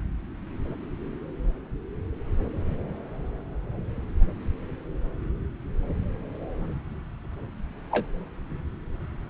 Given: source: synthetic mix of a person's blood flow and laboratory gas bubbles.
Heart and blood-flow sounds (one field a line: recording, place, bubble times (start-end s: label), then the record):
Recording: Doppler ultrasound of blood flow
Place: subclavian vein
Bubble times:
7.91-8.06 s: bubbles
From the record:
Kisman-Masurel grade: 112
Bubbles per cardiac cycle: 1 to 2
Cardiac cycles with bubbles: 1 to 10%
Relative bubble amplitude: moderate (0.250 to 0.450)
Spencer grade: 1 (occasional bubble signal discernible with the cardiac motion signal, with majority of cardiac periods free of bubbles)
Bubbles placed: anywhere in the cardiac cycle